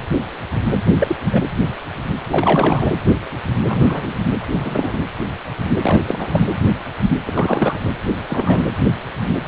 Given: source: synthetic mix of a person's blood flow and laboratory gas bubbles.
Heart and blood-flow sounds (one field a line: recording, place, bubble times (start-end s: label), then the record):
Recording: Doppler ultrasound of blood flow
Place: precordium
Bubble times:
0.73-0.80 s: bubbles
0.90-1.16 s: bubbles
1.31-1.42 s: bubbles
2.30-2.90 s: bubbles
3.64-4.13 s: bubbles
4.53-5.03 s: bubbles
5.82-6.00 s: bubbles
6.06-6.47 s: bubbles
7.26-7.79 s: bubbles
8.28-8.65 s: bubbles
From the record:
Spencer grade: 3 (all of the cardiac periods contain showers or single bubble signals, but not dominating or overriding the cardiac motion signals)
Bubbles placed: anywhere in the cardiac cycle